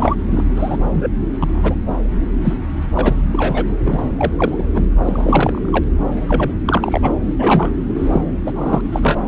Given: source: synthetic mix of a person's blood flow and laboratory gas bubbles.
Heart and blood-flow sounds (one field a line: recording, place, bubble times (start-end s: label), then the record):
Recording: Doppler ultrasound of blood flow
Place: subclavian vein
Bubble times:
0.00-0.15 s: bubbles
0.21-0.44 s: bubbles
0.56-0.78 s: bubbles
0.93-1.08 s: bubbles
1.40-1.75 s: bubbles
2.44-2.54 s: bubbles
2.95-3.16 s: bubbles
3.32-3.65 s: bubbles
3.85-4.02 s: bubbles
4.17-4.31 s: bubbles
4.37-4.83 s: bubbles
5.06-5.84 s: bubbles
6.28-6.51 s: bubbles
6.65-7.12 s: bubbles
7.38-7.71 s: bubbles
7.94-8.22 s: bubbles
8.46-8.52 s: bubbles
8.55-8.81 s: bubbles
8.92-9.20 s: bubbles
From the record:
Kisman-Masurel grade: 243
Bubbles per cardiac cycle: several, 3 to 8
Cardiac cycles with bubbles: 100%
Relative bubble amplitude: loud (0.450 to 0.775)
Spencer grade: 3 (all of the cardiac periods contain showers or single bubble signals, but not dominating or overriding the cardiac motion signals)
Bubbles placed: anywhere in the cardiac cycle